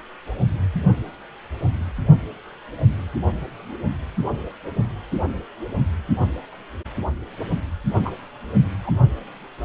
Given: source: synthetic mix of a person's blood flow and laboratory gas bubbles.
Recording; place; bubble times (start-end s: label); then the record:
Doppler ultrasound of blood flow; precordium
8.04-8.11 s: bubbles
8.83-8.91 s: bubbles
From the record:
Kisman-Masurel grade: 112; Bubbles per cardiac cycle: 1 to 2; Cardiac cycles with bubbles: 1 to 10%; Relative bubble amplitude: moderate (0.250 to 0.450); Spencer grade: 1 (occasional bubble signal discernible with the cardiac motion signal, with majority of cardiac periods free of bubbles); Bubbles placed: only in the low amplitude regions of the cardiac cycle